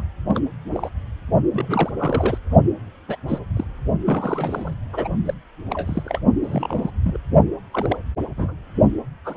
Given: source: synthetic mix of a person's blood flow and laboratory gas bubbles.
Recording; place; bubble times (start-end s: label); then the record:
Doppler ultrasound of blood flow; precordium
0.00-0.03 s: bubbles
0.27-0.40 s: bubbles
0.72-0.90 s: bubbles
1.52-1.90 s: bubbles
1.98-2.38 s: bubbles
3.08-3.17 s: bubbles
3.28-3.38 s: bubbles
3.56-3.65 s: bubbles
4.05-4.74 s: bubbles
4.92-5.08 s: bubbles
5.25-5.34 s: bubbles
5.70-6.19 s: bubbles
6.43-6.91 s: bubbles
7.04-7.18 s: bubbles
7.72-7.98 s: bubbles
8.37-8.55 s: bubbles
9.24-9.36 s: bubbles
From the record:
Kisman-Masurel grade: 242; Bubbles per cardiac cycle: several, 3 to 8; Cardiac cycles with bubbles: 100%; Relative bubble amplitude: moderate (0.250 to 0.450); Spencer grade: 3 (all of the cardiac periods contain showers or single bubble signals, but not dominating or overriding the cardiac motion signals); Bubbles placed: only in the low amplitude regions of the cardiac cycle